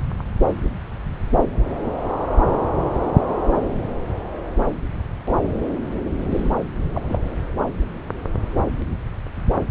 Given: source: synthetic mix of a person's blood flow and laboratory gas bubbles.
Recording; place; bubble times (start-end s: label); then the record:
Doppler ultrasound of blood flow; subclavian vein
6.22-6.53 s: bubbles
6.61-6.67 s: bubbles
6.94-7.01 s: bubbles
7.08-7.42 s: bubbles
From the record:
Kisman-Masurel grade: 211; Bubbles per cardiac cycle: several, 3 to 8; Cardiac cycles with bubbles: 1 to 10%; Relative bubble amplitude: barely perceptible (0.100 to 0.250); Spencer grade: 1 (occasional bubble signal discernible with the cardiac motion signal, with majority of cardiac periods free of bubbles); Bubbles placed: anywhere in the cardiac cycle